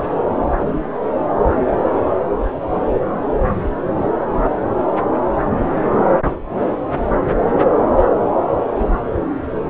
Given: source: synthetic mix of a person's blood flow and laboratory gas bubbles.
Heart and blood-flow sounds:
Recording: Doppler ultrasound of blood flow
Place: subclavian vein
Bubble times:
0.00-0.04 s: bubbles
3.28-3.32 s: bubbles
3.56-3.69 s: bubbles
From the record:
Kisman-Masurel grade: 121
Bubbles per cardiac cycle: 1 to 2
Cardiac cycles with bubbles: 10 to 50%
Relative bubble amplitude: barely perceptible (0.100 to 0.250)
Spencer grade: 2 (many but less than half of the cardiac periods contain bubble signals, singularly or in groups)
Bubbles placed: anywhere in the cardiac cycle

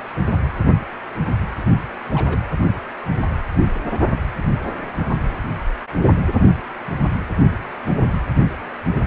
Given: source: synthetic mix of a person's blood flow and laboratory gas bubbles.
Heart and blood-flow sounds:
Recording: Doppler ultrasound of blood flow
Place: precordium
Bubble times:
2.13-2.40 s: bubbles
From the record:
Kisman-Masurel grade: 111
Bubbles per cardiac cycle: 1 to 2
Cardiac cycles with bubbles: 1 to 10%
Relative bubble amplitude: barely perceptible (0.100 to 0.250)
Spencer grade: 1 (occasional bubble signal discernible with the cardiac motion signal, with majority of cardiac periods free of bubbles)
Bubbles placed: anywhere in the cardiac cycle

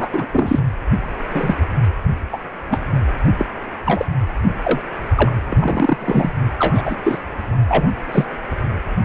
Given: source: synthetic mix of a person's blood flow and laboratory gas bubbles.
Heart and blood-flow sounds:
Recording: Doppler ultrasound of blood flow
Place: precordium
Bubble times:
0.00-0.09 s: bubbles
0.12-0.26 s: bubbles
0.33-0.59 s: bubbles
1.30-1.55 s: bubbles
2.32-2.38 s: bubbles
2.70-2.78 s: bubbles
3.38-3.45 s: bubbles
3.85-4.05 s: bubbles
4.63-4.81 s: bubbles
5.17-5.31 s: bubbles
5.49-6.33 s: bubbles
6.59-6.97 s: bubbles
7.03-7.18 s: bubbles
7.68-7.91 s: bubbles
8.12-8.25 s: bubbles
From the record:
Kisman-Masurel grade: 242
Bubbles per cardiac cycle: several, 3 to 8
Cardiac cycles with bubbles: 100%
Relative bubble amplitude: moderate (0.250 to 0.450)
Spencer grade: 3 (all of the cardiac periods contain showers or single bubble signals, but not dominating or overriding the cardiac motion signals)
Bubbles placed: only in the low amplitude regions of the cardiac cycle

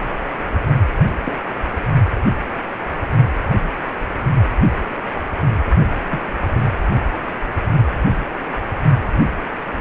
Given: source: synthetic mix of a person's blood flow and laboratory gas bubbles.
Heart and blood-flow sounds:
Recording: Doppler ultrasound of blood flow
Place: precordium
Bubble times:
1.25-1.37 s: bubbles
6.09-6.20 s: bubbles
6.55-6.62 s: bubbles
From the record:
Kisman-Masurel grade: 122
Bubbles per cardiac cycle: 1 to 2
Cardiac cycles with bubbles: 10 to 50%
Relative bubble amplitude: moderate (0.250 to 0.450)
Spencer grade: 2 (many but less than half of the cardiac periods contain bubble signals, singularly or in groups)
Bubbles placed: only in the low amplitude regions of the cardiac cycle

